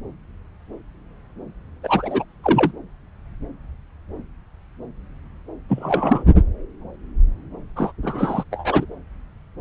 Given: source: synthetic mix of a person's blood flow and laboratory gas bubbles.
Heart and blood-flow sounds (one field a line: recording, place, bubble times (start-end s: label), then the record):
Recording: Doppler ultrasound of blood flow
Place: subclavian vein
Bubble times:
1.83-2.24 s: bubbles
2.44-2.71 s: bubbles
5.69-6.23 s: bubbles
7.76-7.92 s: bubbles
8.03-8.44 s: bubbles
8.51-8.86 s: bubbles
From the record:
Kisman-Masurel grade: 223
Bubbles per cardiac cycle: several, 3 to 8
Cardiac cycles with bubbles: 10 to 50%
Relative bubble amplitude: loud (0.450 to 0.775)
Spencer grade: 2 (many but less than half of the cardiac periods contain bubble signals, singularly or in groups)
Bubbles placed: anywhere in the cardiac cycle